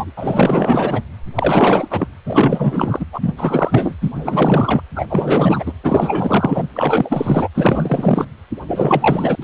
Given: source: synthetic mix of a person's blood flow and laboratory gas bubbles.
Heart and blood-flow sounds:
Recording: Doppler ultrasound of blood flow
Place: precordium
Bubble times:
0.00-0.11 s: bubbles
0.17-1.02 s: bubbles
1.34-2.08 s: bubbles
2.27-3.06 s: bubbles
3.12-3.35 s: bubbles
3.37-3.95 s: bubbles
4.01-4.11 s: bubbles
4.14-4.81 s: bubbles
4.95-5.06 s: bubbles
5.09-5.72 s: bubbles
5.83-6.67 s: bubbles
6.74-7.48 s: bubbles
7.54-8.28 s: bubbles
8.67-9.36 s: bubbles
9.42-9.44 s: bubbles
From the record:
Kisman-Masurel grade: 444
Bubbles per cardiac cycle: continuous sound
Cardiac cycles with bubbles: 100%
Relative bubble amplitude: maximal (0.775 to 0.999)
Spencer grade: 4 (maximum detectable bubble signal sounding continuously throughout systole and diastole of every cardiac period, and overriding the amplitude of the normal cardiac signals)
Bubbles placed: anywhere in the cardiac cycle

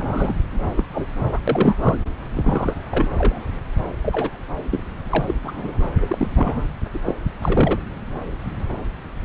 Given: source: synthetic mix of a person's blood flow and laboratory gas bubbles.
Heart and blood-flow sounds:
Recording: Doppler ultrasound of blood flow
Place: subclavian vein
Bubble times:
0.00-0.35 s: bubbles
0.76-0.84 s: bubbles
0.92-1.06 s: bubbles
1.24-1.41 s: bubbles
1.47-1.78 s: bubbles
1.81-1.98 s: bubbles
2.33-2.75 s: bubbles
2.91-3.41 s: bubbles
4.03-4.36 s: bubbles
4.71-4.83 s: bubbles
5.09-5.34 s: bubbles
5.42-5.85 s: bubbles
6.00-6.28 s: bubbles
6.34-6.66 s: bubbles
6.94-6.99 s: bubbles
7.04-7.15 s: bubbles
7.38-7.78 s: bubbles
From the record:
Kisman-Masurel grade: 232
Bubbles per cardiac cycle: several, 3 to 8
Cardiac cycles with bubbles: 50 to 99%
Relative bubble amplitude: moderate (0.250 to 0.450)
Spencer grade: 3 (all of the cardiac periods contain showers or single bubble signals, but not dominating or overriding the cardiac motion signals)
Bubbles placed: anywhere in the cardiac cycle

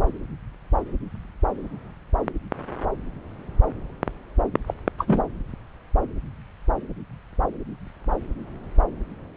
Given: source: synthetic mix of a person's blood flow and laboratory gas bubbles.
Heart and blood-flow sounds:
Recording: Doppler ultrasound of blood flow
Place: subclavian vein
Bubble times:
4.67-4.74 s: bubbles
4.99-5.22 s: bubbles
From the record:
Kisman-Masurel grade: 212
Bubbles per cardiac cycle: several, 3 to 8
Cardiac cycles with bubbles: 1 to 10%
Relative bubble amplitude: moderate (0.250 to 0.450)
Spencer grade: 1 (occasional bubble signal discernible with the cardiac motion signal, with majority of cardiac periods free of bubbles)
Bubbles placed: anywhere in the cardiac cycle

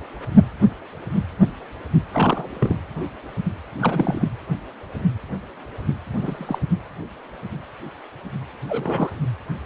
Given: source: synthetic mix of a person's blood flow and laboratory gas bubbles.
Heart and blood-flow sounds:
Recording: Doppler ultrasound of blood flow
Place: precordium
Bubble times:
2.13-2.77 s: bubbles
3.78-4.29 s: bubbles
6.21-6.58 s: bubbles
8.69-9.09 s: bubbles
From the record:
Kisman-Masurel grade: 222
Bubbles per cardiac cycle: several, 3 to 8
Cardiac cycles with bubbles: 10 to 50%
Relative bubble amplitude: moderate (0.250 to 0.450)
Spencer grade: 2 (many but less than half of the cardiac periods contain bubble signals, singularly or in groups)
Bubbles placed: anywhere in the cardiac cycle

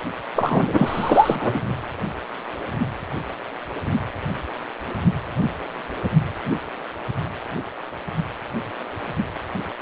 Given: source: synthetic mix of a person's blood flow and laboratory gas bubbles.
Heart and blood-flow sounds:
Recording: Doppler ultrasound of blood flow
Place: precordium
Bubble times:
0.36-1.60 s: bubbles
From the record:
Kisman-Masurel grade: 213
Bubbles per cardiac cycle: several, 3 to 8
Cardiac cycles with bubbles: 1 to 10%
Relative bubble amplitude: loud (0.450 to 0.775)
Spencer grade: 1 (occasional bubble signal discernible with the cardiac motion signal, with majority of cardiac periods free of bubbles)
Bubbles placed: anywhere in the cardiac cycle

